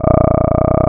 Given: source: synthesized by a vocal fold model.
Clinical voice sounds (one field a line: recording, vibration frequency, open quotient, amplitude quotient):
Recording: sustained vowel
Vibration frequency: 30 Hz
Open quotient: 0.2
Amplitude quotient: 1.4